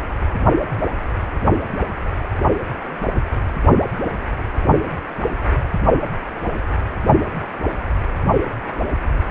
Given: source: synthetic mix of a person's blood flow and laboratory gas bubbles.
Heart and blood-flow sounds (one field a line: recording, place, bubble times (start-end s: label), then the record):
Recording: Doppler ultrasound of blood flow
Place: precordium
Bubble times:
no bubbles
From the record:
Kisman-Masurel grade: 000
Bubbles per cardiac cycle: 0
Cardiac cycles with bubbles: 0%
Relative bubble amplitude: no bubbles discernible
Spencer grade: 0 (complete lack of bubble signals)